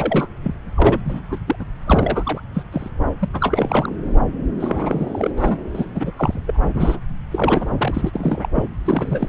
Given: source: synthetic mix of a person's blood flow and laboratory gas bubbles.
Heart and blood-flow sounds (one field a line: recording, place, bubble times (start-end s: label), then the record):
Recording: Doppler ultrasound of blood flow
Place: subclavian vein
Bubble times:
0.00-0.28 s: bubbles
0.43-0.55 s: bubbles
0.77-1.00 s: bubbles
1.05-1.21 s: bubbles
1.29-1.38 s: bubbles
1.47-1.56 s: bubbles
1.59-1.65 s: bubbles
1.86-2.41 s: bubbles
2.54-2.62 s: bubbles
2.72-2.89 s: bubbles
3.20-3.29 s: bubbles
3.33-3.96 s: bubbles
4.59-5.30 s: bubbles
5.36-5.63 s: bubbles
5.75-5.86 s: bubbles
5.95-6.12 s: bubbles
6.16-6.40 s: bubbles
6.46-6.61 s: bubbles
6.75-6.99 s: bubbles
7.31-8.49 s: bubbles
8.55-8.68 s: bubbles
8.85-9.29 s: bubbles
From the record:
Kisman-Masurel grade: 342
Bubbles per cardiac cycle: rolling drumbeat, 9 or more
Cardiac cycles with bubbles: 100%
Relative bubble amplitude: moderate (0.250 to 0.450)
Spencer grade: 3 (all of the cardiac periods contain showers or single bubble signals, but not dominating or overriding the cardiac motion signals)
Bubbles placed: anywhere in the cardiac cycle